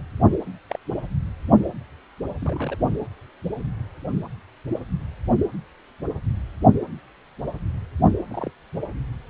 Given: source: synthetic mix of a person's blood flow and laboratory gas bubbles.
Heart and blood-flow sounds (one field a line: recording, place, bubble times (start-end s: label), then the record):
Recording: Doppler ultrasound of blood flow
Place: precordium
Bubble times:
0.69-0.77 s: bubbles
2.42-2.77 s: bubbles
4.73-4.80 s: bubbles
8.02-8.13 s: bubbles
8.30-8.51 s: bubbles
From the record:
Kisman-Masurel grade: 121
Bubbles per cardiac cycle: 1 to 2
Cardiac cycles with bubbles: 10 to 50%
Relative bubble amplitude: barely perceptible (0.100 to 0.250)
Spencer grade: 2 (many but less than half of the cardiac periods contain bubble signals, singularly or in groups)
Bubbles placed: anywhere in the cardiac cycle